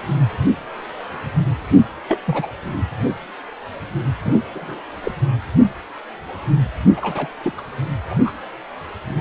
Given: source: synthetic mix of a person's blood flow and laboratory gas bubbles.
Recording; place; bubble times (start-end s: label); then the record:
Doppler ultrasound of blood flow; precordium
2.08-2.21 s: bubbles
2.25-2.48 s: bubbles
4.23-4.42 s: bubbles
4.54-4.83 s: bubbles
5.04-5.12 s: bubbles
6.96-7.29 s: bubbles
7.43-7.53 s: bubbles
7.58-7.62 s: bubbles
8.09-8.20 s: bubbles
8.25-8.32 s: bubbles
From the record:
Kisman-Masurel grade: 232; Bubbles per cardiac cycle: several, 3 to 8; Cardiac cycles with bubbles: 50 to 99%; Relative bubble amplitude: moderate (0.250 to 0.450); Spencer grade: 3 (all of the cardiac periods contain showers or single bubble signals, but not dominating or overriding the cardiac motion signals); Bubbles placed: anywhere in the cardiac cycle